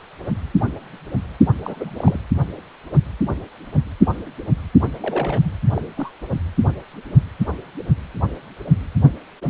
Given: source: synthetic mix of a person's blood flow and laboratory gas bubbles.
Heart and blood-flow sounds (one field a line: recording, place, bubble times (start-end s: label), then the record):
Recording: Doppler ultrasound of blood flow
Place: precordium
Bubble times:
1.62-2.19 s: bubbles
4.82-4.90 s: bubbles
5.01-5.52 s: bubbles
5.71-5.82 s: bubbles
5.97-6.12 s: bubbles
From the record:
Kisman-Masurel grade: 221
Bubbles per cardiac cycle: several, 3 to 8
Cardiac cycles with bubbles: 10 to 50%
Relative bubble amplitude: barely perceptible (0.100 to 0.250)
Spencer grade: 2 (many but less than half of the cardiac periods contain bubble signals, singularly or in groups)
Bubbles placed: anywhere in the cardiac cycle